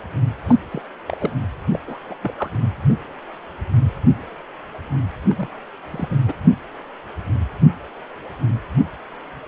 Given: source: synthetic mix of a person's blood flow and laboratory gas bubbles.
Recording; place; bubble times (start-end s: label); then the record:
Doppler ultrasound of blood flow; precordium
0.48-0.55 s: bubbles
0.70-0.81 s: bubbles
1.06-1.32 s: bubbles
1.72-1.79 s: bubbles
1.87-1.99 s: bubbles
2.10-2.15 s: bubbles
2.23-2.33 s: bubbles
2.38-2.50 s: bubbles
2.53-2.58 s: bubbles
5.29-5.49 s: bubbles
5.90-6.21 s: bubbles
6.25-6.33 s: bubbles
From the record:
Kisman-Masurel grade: 221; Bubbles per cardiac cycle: several, 3 to 8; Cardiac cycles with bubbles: 10 to 50%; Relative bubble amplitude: barely perceptible (0.100 to 0.250); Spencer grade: 2 (many but less than half of the cardiac periods contain bubble signals, singularly or in groups); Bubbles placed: anywhere in the cardiac cycle